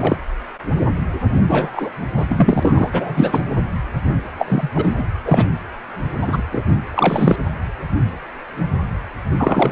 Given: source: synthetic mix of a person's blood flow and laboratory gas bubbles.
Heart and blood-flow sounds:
Doppler ultrasound of blood flow; precordium
0.00-0.17 s: bubbles
1.48-1.90 s: bubbles
2.17-2.25 s: bubbles
2.28-2.89 s: bubbles
2.92-3.42 s: bubbles
4.38-4.70 s: bubbles
4.75-5.04 s: bubbles
5.25-5.47 s: bubbles
6.21-6.42 s: bubbles
6.52-6.63 s: bubbles
6.94-7.36 s: bubbles
9.36-9.72 s: bubbles
From the record:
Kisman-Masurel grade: 233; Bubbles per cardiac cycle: several, 3 to 8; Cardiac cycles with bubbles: 50 to 99%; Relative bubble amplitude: loud (0.450 to 0.775); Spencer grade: 3 (all of the cardiac periods contain showers or single bubble signals, but not dominating or overriding the cardiac motion signals); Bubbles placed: anywhere in the cardiac cycle

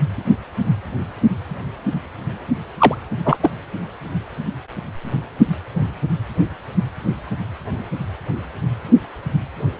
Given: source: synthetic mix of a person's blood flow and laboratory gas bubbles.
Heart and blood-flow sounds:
Doppler ultrasound of blood flow; precordium
2.78-2.95 s: bubbles
3.25-3.37 s: bubbles
3.42-3.52 s: bubbles
From the record:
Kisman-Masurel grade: 213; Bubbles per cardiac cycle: several, 3 to 8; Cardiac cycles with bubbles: 1 to 10%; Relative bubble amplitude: loud (0.450 to 0.775); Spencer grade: 1 (occasional bubble signal discernible with the cardiac motion signal, with majority of cardiac periods free of bubbles); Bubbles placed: only in the low amplitude regions of the cardiac cycle

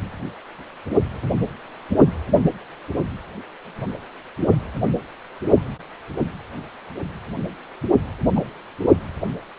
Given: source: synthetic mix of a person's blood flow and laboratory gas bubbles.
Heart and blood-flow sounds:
Doppler ultrasound of blood flow; precordium
8.35-8.41 s: bubbles
From the record:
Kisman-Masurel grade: 112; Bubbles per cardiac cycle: 1 to 2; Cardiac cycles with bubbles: 1 to 10%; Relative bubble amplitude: moderate (0.250 to 0.450); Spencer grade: 1 (occasional bubble signal discernible with the cardiac motion signal, with majority of cardiac periods free of bubbles); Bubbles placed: only in the low amplitude regions of the cardiac cycle

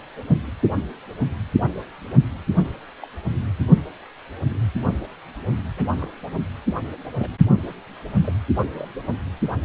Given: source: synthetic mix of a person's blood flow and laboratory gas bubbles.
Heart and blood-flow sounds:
Doppler ultrasound of blood flow; precordium
3.02-3.07 s: bubbles
5.77-5.84 s: bubbles
5.94-6.08 s: bubbles
7.19-7.29 s: bubbles
7.48-7.73 s: bubbles
8.24-8.32 s: bubbles
8.76-8.86 s: bubbles
From the record:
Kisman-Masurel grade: 121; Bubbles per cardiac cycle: 1 to 2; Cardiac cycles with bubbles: 10 to 50%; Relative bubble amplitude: barely perceptible (0.100 to 0.250); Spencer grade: 2 (many but less than half of the cardiac periods contain bubble signals, singularly or in groups); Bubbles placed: only in the low amplitude regions of the cardiac cycle

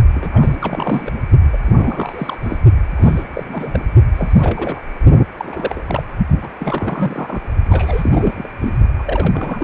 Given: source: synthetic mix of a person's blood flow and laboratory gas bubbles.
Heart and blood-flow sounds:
Doppler ultrasound of blood flow; precordium
0.13-0.56 s: bubbles
0.61-1.12 s: bubbles
1.53-1.58 s: bubbles
1.64-2.39 s: bubbles
2.42-2.58 s: bubbles
2.96-3.24 s: bubbles
3.30-3.80 s: bubbles
4.16-4.83 s: bubbles
5.37-6.03 s: bubbles
6.41-6.49 s: bubbles
6.58-7.52 s: bubbles
7.69-8.47 s: bubbles
8.61-8.69 s: bubbles
8.98-9.04 s: bubbles
9.06-9.64 s: bubbles
From the record:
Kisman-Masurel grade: 342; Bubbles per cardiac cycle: rolling drumbeat, 9 or more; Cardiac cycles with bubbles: 100%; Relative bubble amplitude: moderate (0.250 to 0.450); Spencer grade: 3 (all of the cardiac periods contain showers or single bubble signals, but not dominating or overriding the cardiac motion signals); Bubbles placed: only in the low amplitude regions of the cardiac cycle

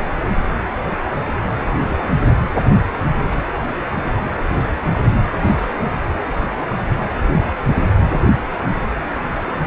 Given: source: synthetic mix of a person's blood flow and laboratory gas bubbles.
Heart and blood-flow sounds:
Doppler ultrasound of blood flow; precordium
0.04-0.20 s: bubbles
1.52-1.99 s: bubbles
3.30-3.44 s: bubbles
4.83-5.01 s: bubbles
5.41-5.78 s: bubbles
7.69-7.79 s: bubbles
From the record:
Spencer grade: 2 (many but less than half of the cardiac periods contain bubble signals, singularly or in groups); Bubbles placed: anywhere in the cardiac cycle

